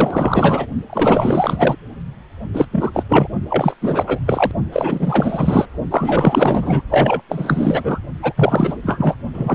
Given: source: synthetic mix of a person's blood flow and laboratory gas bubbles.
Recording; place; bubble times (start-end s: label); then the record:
Doppler ultrasound of blood flow; precordium
0.00-0.66 s: bubbles
0.89-1.75 s: bubbles
2.54-2.66 s: bubbles
2.72-2.90 s: bubbles
2.93-3.02 s: bubbles
3.08-3.27 s: bubbles
3.49-3.74 s: bubbles
3.81-4.19 s: bubbles
4.26-4.51 s: bubbles
4.72-5.65 s: bubbles
5.91-6.81 s: bubbles
6.89-7.21 s: bubbles
7.28-7.99 s: bubbles
8.22-8.33 s: bubbles
8.36-8.78 s: bubbles
8.82-9.16 s: bubbles
9.33-9.55 s: bubbles
From the record:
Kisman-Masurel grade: 444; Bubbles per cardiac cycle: continuous sound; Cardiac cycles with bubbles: 100%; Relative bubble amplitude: maximal (0.775 to 0.999); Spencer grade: 4 (maximum detectable bubble signal sounding continuously throughout systole and diastole of every cardiac period, and overriding the amplitude of the normal cardiac signals); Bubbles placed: only in the low amplitude regions of the cardiac cycle